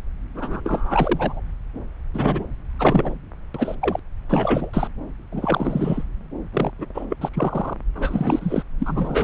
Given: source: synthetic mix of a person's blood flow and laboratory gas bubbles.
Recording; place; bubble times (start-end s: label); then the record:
Doppler ultrasound of blood flow; subclavian vein
0.34-0.61 s: bubbles
0.64-1.40 s: bubbles
2.14-2.45 s: bubbles
2.79-3.15 s: bubbles
3.54-3.75 s: bubbles
3.82-4.00 s: bubbles
4.28-4.70 s: bubbles
4.73-4.88 s: bubbles
5.32-6.03 s: bubbles
6.53-6.71 s: bubbles
6.79-6.86 s: bubbles
6.95-7.05 s: bubbles
7.09-7.15 s: bubbles
7.21-7.29 s: bubbles
7.33-7.74 s: bubbles
7.95-8.62 s: bubbles
8.79-9.24 s: bubbles
From the record:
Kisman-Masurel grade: 342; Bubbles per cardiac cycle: rolling drumbeat, 9 or more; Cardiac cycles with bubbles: 100%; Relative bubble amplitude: moderate (0.250 to 0.450); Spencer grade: 3 (all of the cardiac periods contain showers or single bubble signals, but not dominating or overriding the cardiac motion signals); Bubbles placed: anywhere in the cardiac cycle